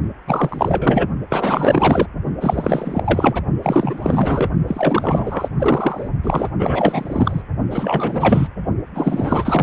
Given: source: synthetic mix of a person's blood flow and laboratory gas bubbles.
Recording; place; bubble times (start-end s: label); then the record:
Doppler ultrasound of blood flow; precordium
0.27-1.08 s: bubbles
1.29-2.07 s: bubbles
2.40-3.42 s: bubbles
3.62-4.50 s: bubbles
4.67-5.49 s: bubbles
5.58-6.08 s: bubbles
6.24-6.50 s: bubbles
6.58-7.42 s: bubbles
7.70-8.48 s: bubbles
8.94-9.63 s: bubbles
From the record:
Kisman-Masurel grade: 444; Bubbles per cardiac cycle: continuous sound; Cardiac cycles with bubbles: 100%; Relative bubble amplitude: maximal (0.775 to 0.999); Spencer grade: 4 (maximum detectable bubble signal sounding continuously throughout systole and diastole of every cardiac period, and overriding the amplitude of the normal cardiac signals); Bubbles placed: only in the low amplitude regions of the cardiac cycle